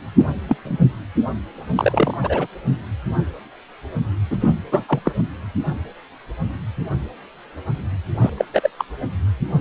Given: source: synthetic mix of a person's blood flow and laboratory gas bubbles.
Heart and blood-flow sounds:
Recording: Doppler ultrasound of blood flow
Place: precordium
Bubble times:
0.18-0.27 s: bubbles
0.48-0.56 s: bubbles
0.65-0.76 s: bubbles
1.75-2.18 s: bubbles
2.22-2.47 s: bubbles
4.30-4.38 s: bubbles
4.40-4.54 s: bubbles
4.71-4.83 s: bubbles
4.88-4.99 s: bubbles
5.04-5.12 s: bubbles
8.20-8.30 s: bubbles
8.37-8.45 s: bubbles
8.54-8.70 s: bubbles
8.79-8.85 s: bubbles
9.59-9.61 s: bubbles
From the record:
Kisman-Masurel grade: 233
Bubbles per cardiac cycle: several, 3 to 8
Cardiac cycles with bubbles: 50 to 99%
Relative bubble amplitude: loud (0.450 to 0.775)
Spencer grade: 3 (all of the cardiac periods contain showers or single bubble signals, but not dominating or overriding the cardiac motion signals)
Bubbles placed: anywhere in the cardiac cycle

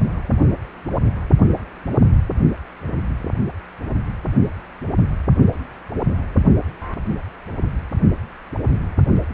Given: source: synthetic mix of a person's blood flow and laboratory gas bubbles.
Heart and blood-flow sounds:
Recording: Doppler ultrasound of blood flow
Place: precordium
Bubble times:
no bubbles
From the record:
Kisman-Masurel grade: 000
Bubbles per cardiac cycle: 0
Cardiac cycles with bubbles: 0%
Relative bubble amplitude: no bubbles discernible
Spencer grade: 0 (complete lack of bubble signals)

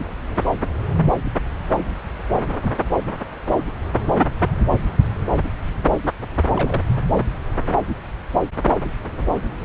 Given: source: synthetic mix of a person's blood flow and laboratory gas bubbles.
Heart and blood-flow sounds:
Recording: Doppler ultrasound of blood flow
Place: subclavian vein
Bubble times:
6.56-6.83 s: bubbles
From the record:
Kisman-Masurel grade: 111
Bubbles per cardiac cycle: 1 to 2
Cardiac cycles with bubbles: 1 to 10%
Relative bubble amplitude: barely perceptible (0.100 to 0.250)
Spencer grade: 1 (occasional bubble signal discernible with the cardiac motion signal, with majority of cardiac periods free of bubbles)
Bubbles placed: anywhere in the cardiac cycle

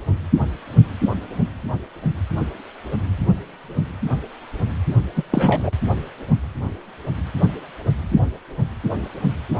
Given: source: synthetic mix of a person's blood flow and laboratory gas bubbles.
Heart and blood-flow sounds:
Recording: Doppler ultrasound of blood flow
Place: precordium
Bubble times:
5.16-5.23 s: bubbles
5.30-5.72 s: bubbles
From the record:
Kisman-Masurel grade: 212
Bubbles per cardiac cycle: several, 3 to 8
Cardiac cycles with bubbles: 1 to 10%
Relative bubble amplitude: moderate (0.250 to 0.450)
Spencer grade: 1 (occasional bubble signal discernible with the cardiac motion signal, with majority of cardiac periods free of bubbles)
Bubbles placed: anywhere in the cardiac cycle

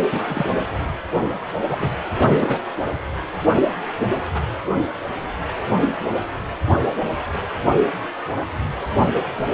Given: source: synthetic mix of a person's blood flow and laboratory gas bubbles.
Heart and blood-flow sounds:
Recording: Doppler ultrasound of blood flow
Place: precordium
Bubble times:
0.12-0.20 s: bubbles
0.28-0.49 s: bubbles
0.55-0.64 s: bubbles
1.13-1.33 s: bubbles
1.69-1.77 s: bubbles
1.80-1.92 s: bubbles
2.19-2.58 s: bubbles
From the record:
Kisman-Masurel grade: 222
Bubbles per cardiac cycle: several, 3 to 8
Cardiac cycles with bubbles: 10 to 50%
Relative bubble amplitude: moderate (0.250 to 0.450)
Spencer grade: 2 (many but less than half of the cardiac periods contain bubble signals, singularly or in groups)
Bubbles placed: anywhere in the cardiac cycle

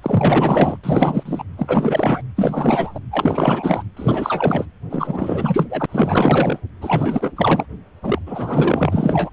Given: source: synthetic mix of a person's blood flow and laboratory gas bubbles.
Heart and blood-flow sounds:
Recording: Doppler ultrasound of blood flow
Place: precordium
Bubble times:
0.02-0.78 s: bubbles
0.83-1.44 s: bubbles
1.57-2.21 s: bubbles
2.36-3.00 s: bubbles
3.11-3.83 s: bubbles
3.96-4.66 s: bubbles
4.89-5.67 s: bubbles
5.70-5.86 s: bubbles
5.88-6.60 s: bubbles
6.80-7.32 s: bubbles
7.36-7.66 s: bubbles
8.03-8.19 s: bubbles
8.26-9.30 s: bubbles
From the record:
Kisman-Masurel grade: 444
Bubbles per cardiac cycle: continuous sound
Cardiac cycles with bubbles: 100%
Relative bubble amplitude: maximal (0.775 to 0.999)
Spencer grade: 4 (maximum detectable bubble signal sounding continuously throughout systole and diastole of every cardiac period, and overriding the amplitude of the normal cardiac signals)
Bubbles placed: anywhere in the cardiac cycle

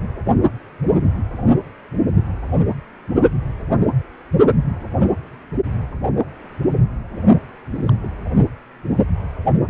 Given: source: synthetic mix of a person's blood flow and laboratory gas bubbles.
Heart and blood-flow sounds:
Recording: Doppler ultrasound of blood flow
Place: precordium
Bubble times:
7.70-7.92 s: bubbles
8.03-8.08 s: bubbles
From the record:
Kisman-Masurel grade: 211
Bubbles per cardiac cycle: several, 3 to 8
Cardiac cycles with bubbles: 1 to 10%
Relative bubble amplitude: barely perceptible (0.100 to 0.250)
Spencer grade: 1 (occasional bubble signal discernible with the cardiac motion signal, with majority of cardiac periods free of bubbles)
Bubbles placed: only in the low amplitude regions of the cardiac cycle

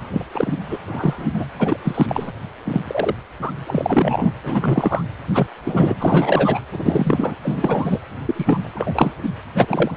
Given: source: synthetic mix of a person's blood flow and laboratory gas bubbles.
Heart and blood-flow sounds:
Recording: Doppler ultrasound of blood flow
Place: precordium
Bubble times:
0.13-0.25 s: bubbles
0.32-0.79 s: bubbles
0.86-1.28 s: bubbles
1.33-1.45 s: bubbles
1.58-1.77 s: bubbles
1.84-2.32 s: bubbles
2.65-2.81 s: bubbles
2.87-3.15 s: bubbles
3.42-3.53 s: bubbles
3.67-4.33 s: bubbles
4.43-5.03 s: bubbles
5.29-5.48 s: bubbles
5.65-5.96 s: bubbles
6.00-6.61 s: bubbles
6.73-7.35 s: bubbles
7.44-8.00 s: bubbles
8.25-8.71 s: bubbles
8.75-9.12 s: bubbles
9.22-9.29 s: bubbles
9.55-9.92 s: bubbles
From the record:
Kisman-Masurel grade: 243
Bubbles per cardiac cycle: several, 3 to 8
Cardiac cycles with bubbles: 100%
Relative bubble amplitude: loud (0.450 to 0.775)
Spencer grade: 3 (all of the cardiac periods contain showers or single bubble signals, but not dominating or overriding the cardiac motion signals)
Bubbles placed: anywhere in the cardiac cycle

